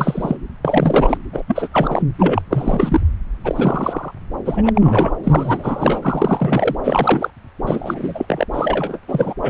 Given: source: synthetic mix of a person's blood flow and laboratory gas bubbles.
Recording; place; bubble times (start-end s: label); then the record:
Doppler ultrasound of blood flow; subclavian vein
0.00-0.37 s: bubbles
0.65-1.18 s: bubbles
1.33-1.44 s: bubbles
1.48-1.68 s: bubbles
1.71-2.02 s: bubbles
2.19-2.42 s: bubbles
2.50-3.00 s: bubbles
3.44-4.12 s: bubbles
4.46-5.12 s: bubbles
5.24-6.00 s: bubbles
6.02-6.75 s: bubbles
6.83-7.30 s: bubbles
7.67-8.46 s: bubbles
8.53-8.99 s: bubbles
9.07-9.35 s: bubbles
9.42-9.50 s: bubbles
From the record:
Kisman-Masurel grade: 343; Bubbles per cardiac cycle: rolling drumbeat, 9 or more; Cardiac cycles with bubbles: 100%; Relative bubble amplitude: loud (0.450 to 0.775); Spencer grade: 3 (all of the cardiac periods contain showers or single bubble signals, but not dominating or overriding the cardiac motion signals); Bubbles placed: anywhere in the cardiac cycle